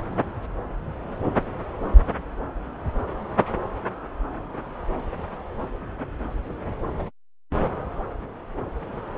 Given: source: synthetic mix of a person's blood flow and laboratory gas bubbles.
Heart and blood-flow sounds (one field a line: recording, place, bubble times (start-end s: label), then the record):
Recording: Doppler ultrasound of blood flow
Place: subclavian vein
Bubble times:
no bubbles
From the record:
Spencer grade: 0 (complete lack of bubble signals)